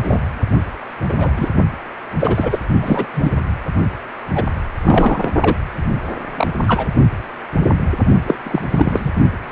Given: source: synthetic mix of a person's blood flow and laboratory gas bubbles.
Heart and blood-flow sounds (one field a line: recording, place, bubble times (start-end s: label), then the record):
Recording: Doppler ultrasound of blood flow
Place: precordium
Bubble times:
0.03-0.21 s: bubbles
1.09-1.14 s: bubbles
1.19-1.31 s: bubbles
1.35-1.48 s: bubbles
2.19-2.59 s: bubbles
2.83-3.06 s: bubbles
3.14-3.32 s: bubbles
4.35-4.44 s: bubbles
4.82-5.28 s: bubbles
5.40-5.56 s: bubbles
6.29-6.61 s: bubbles
6.67-6.87 s: bubbles
8.27-8.36 s: bubbles
8.43-8.62 s: bubbles
8.71-9.10 s: bubbles
9.48-9.52 s: bubbles
From the record:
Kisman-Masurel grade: 233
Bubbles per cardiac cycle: several, 3 to 8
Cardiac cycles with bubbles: 50 to 99%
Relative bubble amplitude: loud (0.450 to 0.775)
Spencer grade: 3 (all of the cardiac periods contain showers or single bubble signals, but not dominating or overriding the cardiac motion signals)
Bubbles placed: only in the low amplitude regions of the cardiac cycle